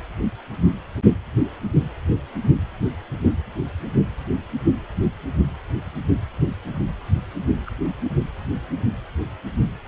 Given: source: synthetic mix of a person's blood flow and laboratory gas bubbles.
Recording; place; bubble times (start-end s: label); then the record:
Doppler ultrasound of blood flow; precordium
7.66-7.71 s: bubbles
From the record:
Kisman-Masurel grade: 111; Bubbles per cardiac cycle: 1 to 2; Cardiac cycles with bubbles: 1 to 10%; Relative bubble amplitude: barely perceptible (0.100 to 0.250); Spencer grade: 1 (occasional bubble signal discernible with the cardiac motion signal, with majority of cardiac periods free of bubbles); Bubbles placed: anywhere in the cardiac cycle